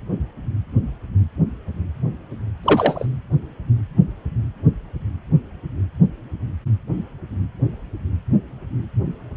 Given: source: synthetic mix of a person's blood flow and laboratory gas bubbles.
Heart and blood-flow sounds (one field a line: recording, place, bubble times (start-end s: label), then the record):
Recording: Doppler ultrasound of blood flow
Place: precordium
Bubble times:
2.62-3.06 s: bubbles
From the record:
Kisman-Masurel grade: 113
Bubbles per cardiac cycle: 1 to 2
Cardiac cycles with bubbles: 1 to 10%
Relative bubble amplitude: loud (0.450 to 0.775)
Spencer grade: 1 (occasional bubble signal discernible with the cardiac motion signal, with majority of cardiac periods free of bubbles)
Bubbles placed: anywhere in the cardiac cycle